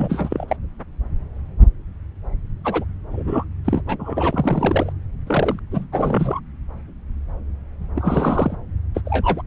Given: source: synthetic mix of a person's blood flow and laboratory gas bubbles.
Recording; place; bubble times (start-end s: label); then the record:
Doppler ultrasound of blood flow; subclavian vein
0.00-0.56 s: bubbles
2.65-2.85 s: bubbles
3.11-3.45 s: bubbles
3.65-3.82 s: bubbles
3.87-4.92 s: bubbles
5.27-5.59 s: bubbles
5.71-5.85 s: bubbles
5.92-6.40 s: bubbles
7.95-8.56 s: bubbles
8.94-9.01 s: bubbles
9.05-9.42 s: bubbles
From the record:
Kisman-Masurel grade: 232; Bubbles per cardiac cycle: several, 3 to 8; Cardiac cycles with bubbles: 50 to 99%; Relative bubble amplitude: moderate (0.250 to 0.450); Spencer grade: 3 (all of the cardiac periods contain showers or single bubble signals, but not dominating or overriding the cardiac motion signals); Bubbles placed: anywhere in the cardiac cycle